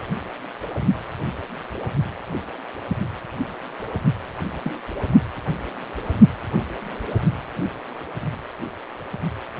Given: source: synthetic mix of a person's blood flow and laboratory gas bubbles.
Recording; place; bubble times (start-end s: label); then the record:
Doppler ultrasound of blood flow; precordium
4.64-4.73 s: bubbles
From the record:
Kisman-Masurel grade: 111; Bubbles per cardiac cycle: 1 to 2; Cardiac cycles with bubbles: 1 to 10%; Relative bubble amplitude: barely perceptible (0.100 to 0.250); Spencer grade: 1 (occasional bubble signal discernible with the cardiac motion signal, with majority of cardiac periods free of bubbles); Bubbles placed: only in the low amplitude regions of the cardiac cycle